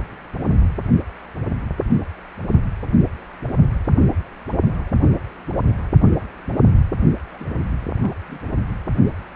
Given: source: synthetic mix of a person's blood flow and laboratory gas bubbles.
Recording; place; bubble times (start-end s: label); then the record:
Doppler ultrasound of blood flow; precordium
7.33-7.45 s: bubbles
8.00-8.14 s: bubbles
8.27-8.39 s: bubbles
8.52-8.63 s: bubbles
From the record:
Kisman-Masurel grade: 211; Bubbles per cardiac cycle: several, 3 to 8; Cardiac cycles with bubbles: 1 to 10%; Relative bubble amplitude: barely perceptible (0.100 to 0.250); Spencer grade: 1 (occasional bubble signal discernible with the cardiac motion signal, with majority of cardiac periods free of bubbles); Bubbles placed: only in the low amplitude regions of the cardiac cycle